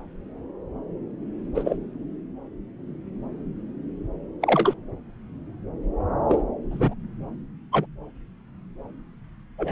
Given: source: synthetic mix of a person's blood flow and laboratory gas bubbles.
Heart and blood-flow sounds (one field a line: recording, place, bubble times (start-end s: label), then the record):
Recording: Doppler ultrasound of blood flow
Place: subclavian vein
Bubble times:
1.54-1.76 s: bubbles
4.42-4.74 s: bubbles
6.29-6.41 s: bubbles
6.71-6.94 s: bubbles
7.72-7.86 s: bubbles
9.58-9.72 s: bubbles
From the record:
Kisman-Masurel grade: 122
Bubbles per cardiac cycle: 1 to 2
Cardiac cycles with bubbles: 10 to 50%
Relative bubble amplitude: moderate (0.250 to 0.450)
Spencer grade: 2 (many but less than half of the cardiac periods contain bubble signals, singularly or in groups)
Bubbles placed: anywhere in the cardiac cycle